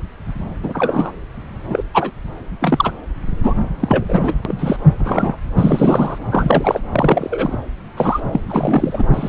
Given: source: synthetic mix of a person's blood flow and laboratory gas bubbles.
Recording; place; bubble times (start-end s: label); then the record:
Doppler ultrasound of blood flow; subclavian vein
0.64-1.11 s: bubbles
1.67-1.82 s: bubbles
1.94-2.11 s: bubbles
2.61-2.92 s: bubbles
3.43-3.53 s: bubbles
3.80-4.05 s: bubbles
4.08-4.33 s: bubbles
4.45-4.77 s: bubbles
5.00-5.37 s: bubbles
5.56-6.19 s: bubbles
6.31-6.82 s: bubbles
6.92-7.57 s: bubbles
7.96-8.20 s: bubbles
8.32-9.05 s: bubbles
9.13-9.29 s: bubbles
From the record:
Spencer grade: 3 (all of the cardiac periods contain showers or single bubble signals, but not dominating or overriding the cardiac motion signals); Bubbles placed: anywhere in the cardiac cycle